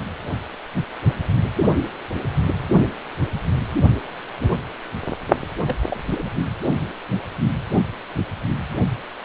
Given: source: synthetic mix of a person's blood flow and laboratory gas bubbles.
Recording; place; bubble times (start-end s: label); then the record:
Doppler ultrasound of blood flow; precordium
5.66-5.77 s: bubbles
5.90-6.01 s: bubbles
6.07-6.29 s: bubbles
From the record:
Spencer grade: 1 (occasional bubble signal discernible with the cardiac motion signal, with majority of cardiac periods free of bubbles); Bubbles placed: only in the low amplitude regions of the cardiac cycle